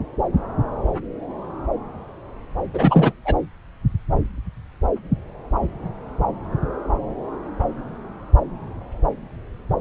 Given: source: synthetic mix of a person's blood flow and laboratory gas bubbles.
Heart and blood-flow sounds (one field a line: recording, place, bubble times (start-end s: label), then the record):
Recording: Doppler ultrasound of blood flow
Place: subclavian vein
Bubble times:
2.74-3.12 s: bubbles
3.25-3.37 s: bubbles
From the record:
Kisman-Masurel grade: 213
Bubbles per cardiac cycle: several, 3 to 8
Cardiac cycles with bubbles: 1 to 10%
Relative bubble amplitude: loud (0.450 to 0.775)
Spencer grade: 1 (occasional bubble signal discernible with the cardiac motion signal, with majority of cardiac periods free of bubbles)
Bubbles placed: anywhere in the cardiac cycle